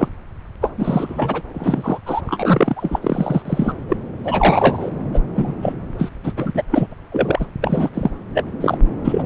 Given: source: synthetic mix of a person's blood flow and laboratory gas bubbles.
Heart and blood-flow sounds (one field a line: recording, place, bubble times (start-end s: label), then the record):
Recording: Doppler ultrasound of blood flow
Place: subclavian vein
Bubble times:
0.00-0.08 s: bubbles
0.61-0.69 s: bubbles
0.77-1.43 s: bubbles
1.54-1.99 s: bubbles
2.05-2.21 s: bubbles
2.26-3.00 s: bubbles
3.02-3.42 s: bubbles
3.45-3.74 s: bubbles
3.87-3.96 s: bubbles
4.24-4.91 s: bubbles
5.13-5.20 s: bubbles
5.36-5.55 s: bubbles
5.62-5.73 s: bubbles
5.98-6.10 s: bubbles
6.23-6.33 s: bubbles
6.37-6.62 s: bubbles
6.71-6.87 s: bubbles
6.92-6.94 s: bubbles
7.12-7.46 s: bubbles
7.62-7.89 s: bubbles
7.94-8.11 s: bubbles
8.35-8.44 s: bubbles
8.61-8.78 s: bubbles
9.04-9.23 s: bubbles
From the record:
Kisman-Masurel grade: 243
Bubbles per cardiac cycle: several, 3 to 8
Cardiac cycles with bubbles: 100%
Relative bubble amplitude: loud (0.450 to 0.775)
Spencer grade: 3 (all of the cardiac periods contain showers or single bubble signals, but not dominating or overriding the cardiac motion signals)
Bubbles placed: anywhere in the cardiac cycle